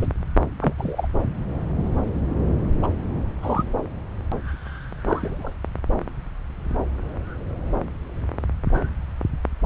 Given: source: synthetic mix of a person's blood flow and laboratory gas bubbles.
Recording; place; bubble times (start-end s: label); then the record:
Doppler ultrasound of blood flow; subclavian vein
0.01-0.08 s: bubbles
0.61-0.73 s: bubbles
0.77-1.07 s: bubbles
2.82-2.88 s: bubbles
3.42-3.63 s: bubbles
5.04-5.53 s: bubbles
From the record:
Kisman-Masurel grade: 122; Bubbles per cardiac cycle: 1 to 2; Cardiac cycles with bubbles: 10 to 50%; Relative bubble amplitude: moderate (0.250 to 0.450); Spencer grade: 2 (many but less than half of the cardiac periods contain bubble signals, singularly or in groups); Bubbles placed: anywhere in the cardiac cycle